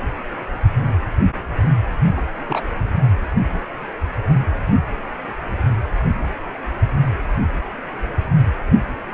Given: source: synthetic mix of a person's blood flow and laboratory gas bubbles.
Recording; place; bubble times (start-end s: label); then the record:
Doppler ultrasound of blood flow; precordium
2.17-2.21 s: bubbles
2.47-2.69 s: bubbles
From the record:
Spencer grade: 1 (occasional bubble signal discernible with the cardiac motion signal, with majority of cardiac periods free of bubbles); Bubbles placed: anywhere in the cardiac cycle